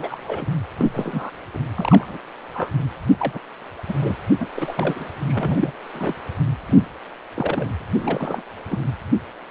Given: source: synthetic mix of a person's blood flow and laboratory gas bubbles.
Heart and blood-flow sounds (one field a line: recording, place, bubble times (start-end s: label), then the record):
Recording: Doppler ultrasound of blood flow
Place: precordium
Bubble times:
0.00-0.45 s: bubbles
0.78-0.91 s: bubbles
0.94-1.30 s: bubbles
1.54-1.59 s: bubbles
1.77-2.18 s: bubbles
2.50-2.74 s: bubbles
3.18-3.40 s: bubbles
3.88-3.94 s: bubbles
4.00-4.16 s: bubbles
4.39-4.46 s: bubbles
4.54-5.10 s: bubbles
5.23-5.71 s: bubbles
5.94-6.13 s: bubbles
6.67-6.87 s: bubbles
7.34-7.68 s: bubbles
7.79-7.81 s: bubbles
7.99-8.43 s: bubbles
8.66-8.87 s: bubbles
From the record:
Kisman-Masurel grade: 242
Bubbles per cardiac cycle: several, 3 to 8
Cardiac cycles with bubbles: 100%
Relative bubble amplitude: moderate (0.250 to 0.450)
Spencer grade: 3 (all of the cardiac periods contain showers or single bubble signals, but not dominating or overriding the cardiac motion signals)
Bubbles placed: anywhere in the cardiac cycle